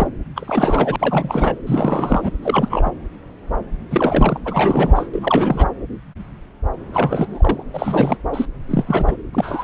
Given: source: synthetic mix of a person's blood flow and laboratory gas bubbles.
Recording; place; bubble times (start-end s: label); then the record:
Doppler ultrasound of blood flow; subclavian vein
0.00-0.07 s: bubbles
0.35-0.96 s: bubbles
0.99-1.58 s: bubbles
1.67-2.31 s: bubbles
2.43-2.91 s: bubbles
3.91-4.41 s: bubbles
4.45-5.09 s: bubbles
5.13-5.67 s: bubbles
6.93-7.63 s: bubbles
7.74-8.17 s: bubbles
8.33-8.47 s: bubbles
8.68-9.17 s: bubbles
9.33-9.64 s: bubbles
From the record:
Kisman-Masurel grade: 333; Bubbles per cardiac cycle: rolling drumbeat, 9 or more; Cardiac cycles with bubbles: 50 to 99%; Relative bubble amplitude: loud (0.450 to 0.775); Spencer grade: 3 (all of the cardiac periods contain showers or single bubble signals, but not dominating or overriding the cardiac motion signals); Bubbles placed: anywhere in the cardiac cycle